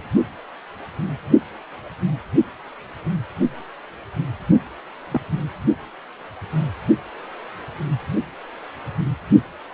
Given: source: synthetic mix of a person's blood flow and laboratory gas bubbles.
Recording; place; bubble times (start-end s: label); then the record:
Doppler ultrasound of blood flow; precordium
5.11-5.21 s: bubbles
From the record:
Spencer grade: 1 (occasional bubble signal discernible with the cardiac motion signal, with majority of cardiac periods free of bubbles); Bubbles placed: only in the low amplitude regions of the cardiac cycle